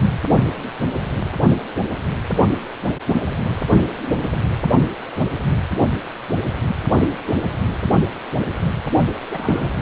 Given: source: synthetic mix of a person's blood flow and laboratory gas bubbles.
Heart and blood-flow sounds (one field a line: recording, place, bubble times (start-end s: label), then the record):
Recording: Doppler ultrasound of blood flow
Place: precordium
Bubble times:
9.31-9.71 s: bubbles
From the record:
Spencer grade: 1 (occasional bubble signal discernible with the cardiac motion signal, with majority of cardiac periods free of bubbles)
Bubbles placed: only in the low amplitude regions of the cardiac cycle